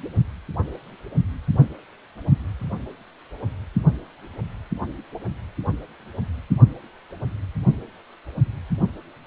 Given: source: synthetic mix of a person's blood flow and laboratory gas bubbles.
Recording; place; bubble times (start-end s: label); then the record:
Doppler ultrasound of blood flow; precordium
no bubbles
From the record:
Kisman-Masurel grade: 000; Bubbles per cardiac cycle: 0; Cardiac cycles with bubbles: 0%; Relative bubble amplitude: no bubbles discernible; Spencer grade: 0 (complete lack of bubble signals)